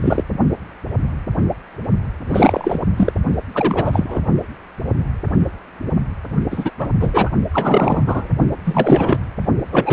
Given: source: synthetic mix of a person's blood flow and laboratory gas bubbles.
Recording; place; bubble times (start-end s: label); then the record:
Doppler ultrasound of blood flow; precordium
0.01-0.23 s: bubbles
2.26-2.79 s: bubbles
2.96-3.12 s: bubbles
3.53-4.21 s: bubbles
6.50-6.72 s: bubbles
6.79-6.91 s: bubbles
7.00-7.30 s: bubbles
7.54-8.03 s: bubbles
8.06-8.29 s: bubbles
8.65-9.18 s: bubbles
9.72-9.93 s: bubbles
From the record:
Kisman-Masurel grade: 333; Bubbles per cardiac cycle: rolling drumbeat, 9 or more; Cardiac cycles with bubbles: 50 to 99%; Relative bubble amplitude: loud (0.450 to 0.775); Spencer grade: 3 (all of the cardiac periods contain showers or single bubble signals, but not dominating or overriding the cardiac motion signals); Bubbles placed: only in the low amplitude regions of the cardiac cycle